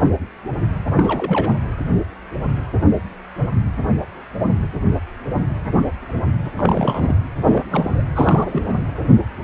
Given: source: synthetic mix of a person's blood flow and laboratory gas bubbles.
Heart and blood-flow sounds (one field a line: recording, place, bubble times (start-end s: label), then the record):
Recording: Doppler ultrasound of blood flow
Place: precordium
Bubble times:
0.91-1.53 s: bubbles
6.56-7.15 s: bubbles
7.46-7.63 s: bubbles
7.71-8.04 s: bubbles
8.14-8.74 s: bubbles
From the record:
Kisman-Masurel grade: 222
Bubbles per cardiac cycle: several, 3 to 8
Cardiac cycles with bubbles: 10 to 50%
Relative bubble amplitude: moderate (0.250 to 0.450)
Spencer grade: 2 (many but less than half of the cardiac periods contain bubble signals, singularly or in groups)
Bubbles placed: anywhere in the cardiac cycle